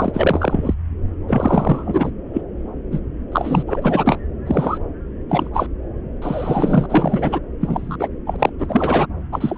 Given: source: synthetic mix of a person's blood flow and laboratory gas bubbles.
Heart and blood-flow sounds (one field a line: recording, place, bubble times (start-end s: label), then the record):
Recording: Doppler ultrasound of blood flow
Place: subclavian vein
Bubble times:
0.00-0.74 s: bubbles
1.28-2.11 s: bubbles
2.33-2.41 s: bubbles
2.91-3.00 s: bubbles
3.31-3.62 s: bubbles
3.67-4.17 s: bubbles
4.46-4.78 s: bubbles
5.29-5.50 s: bubbles
5.54-5.67 s: bubbles
6.21-6.86 s: bubbles
6.89-7.39 s: bubbles
7.60-8.08 s: bubbles
8.27-8.50 s: bubbles
8.59-9.07 s: bubbles
9.32-9.58 s: bubbles
From the record:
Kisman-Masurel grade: 233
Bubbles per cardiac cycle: several, 3 to 8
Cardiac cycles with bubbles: 50 to 99%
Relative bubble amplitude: loud (0.450 to 0.775)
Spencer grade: 3 (all of the cardiac periods contain showers or single bubble signals, but not dominating or overriding the cardiac motion signals)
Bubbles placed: anywhere in the cardiac cycle